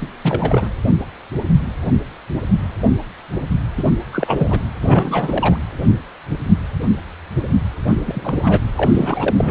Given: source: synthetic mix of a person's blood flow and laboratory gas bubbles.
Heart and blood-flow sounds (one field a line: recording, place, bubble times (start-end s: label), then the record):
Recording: Doppler ultrasound of blood flow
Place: precordium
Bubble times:
0.01-0.08 s: bubbles
0.23-0.67 s: bubbles
3.77-3.83 s: bubbles
4.12-4.60 s: bubbles
4.82-5.58 s: bubbles
7.87-7.96 s: bubbles
8.05-8.59 s: bubbles
8.77-9.51 s: bubbles
From the record:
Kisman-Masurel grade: 332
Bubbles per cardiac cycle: rolling drumbeat, 9 or more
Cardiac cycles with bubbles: 50 to 99%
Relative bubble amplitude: moderate (0.250 to 0.450)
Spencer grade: 3 (all of the cardiac periods contain showers or single bubble signals, but not dominating or overriding the cardiac motion signals)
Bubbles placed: anywhere in the cardiac cycle